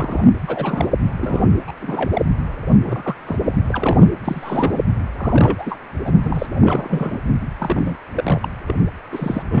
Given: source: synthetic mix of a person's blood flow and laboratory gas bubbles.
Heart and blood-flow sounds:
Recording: Doppler ultrasound of blood flow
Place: precordium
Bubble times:
0.00-0.29 s: bubbles
0.47-0.87 s: bubbles
1.16-1.47 s: bubbles
1.67-1.72 s: bubbles
1.81-2.10 s: bubbles
2.13-2.21 s: bubbles
2.71-2.76 s: bubbles
2.81-3.16 s: bubbles
3.25-3.36 s: bubbles
3.40-3.65 s: bubbles
3.70-4.08 s: bubbles
4.24-4.80 s: bubbles
5.17-5.79 s: bubbles
6.04-6.13 s: bubbles
6.24-6.46 s: bubbles
6.61-7.21 s: bubbles
7.59-7.96 s: bubbles
8.16-8.48 s: bubbles
8.68-8.86 s: bubbles
9.12-9.60 s: bubbles
From the record:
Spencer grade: 3 (all of the cardiac periods contain showers or single bubble signals, but not dominating or overriding the cardiac motion signals)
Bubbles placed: anywhere in the cardiac cycle

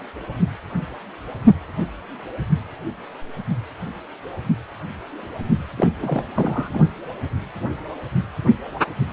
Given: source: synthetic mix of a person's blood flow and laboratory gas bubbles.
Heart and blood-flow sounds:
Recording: Doppler ultrasound of blood flow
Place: precordium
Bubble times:
5.77-5.88 s: bubbles
6.02-6.80 s: bubbles
From the record:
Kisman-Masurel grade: 212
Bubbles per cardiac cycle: several, 3 to 8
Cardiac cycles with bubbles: 1 to 10%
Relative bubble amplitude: moderate (0.250 to 0.450)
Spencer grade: 1 (occasional bubble signal discernible with the cardiac motion signal, with majority of cardiac periods free of bubbles)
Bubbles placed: only in the low amplitude regions of the cardiac cycle

